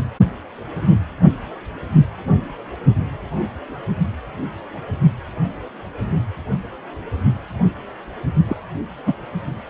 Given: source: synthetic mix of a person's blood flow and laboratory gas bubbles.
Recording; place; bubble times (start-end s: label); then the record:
Doppler ultrasound of blood flow; precordium
8.47-8.56 s: bubbles
9.06-9.13 s: bubbles
From the record:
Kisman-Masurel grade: 112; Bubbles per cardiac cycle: 1 to 2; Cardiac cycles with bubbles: 1 to 10%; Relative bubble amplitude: moderate (0.250 to 0.450); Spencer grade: 1 (occasional bubble signal discernible with the cardiac motion signal, with majority of cardiac periods free of bubbles); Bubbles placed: only in the low amplitude regions of the cardiac cycle